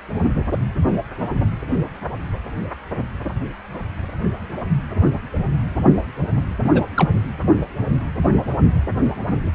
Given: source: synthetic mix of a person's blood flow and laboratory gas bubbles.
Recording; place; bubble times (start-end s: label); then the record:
Doppler ultrasound of blood flow; precordium
6.64-6.71 s: bubbles
6.74-6.82 s: bubbles
6.96-7.10 s: bubbles
From the record:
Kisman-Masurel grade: 212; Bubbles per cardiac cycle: several, 3 to 8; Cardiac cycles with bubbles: 1 to 10%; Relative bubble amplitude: moderate (0.250 to 0.450); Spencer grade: 1 (occasional bubble signal discernible with the cardiac motion signal, with majority of cardiac periods free of bubbles); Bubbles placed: only in the low amplitude regions of the cardiac cycle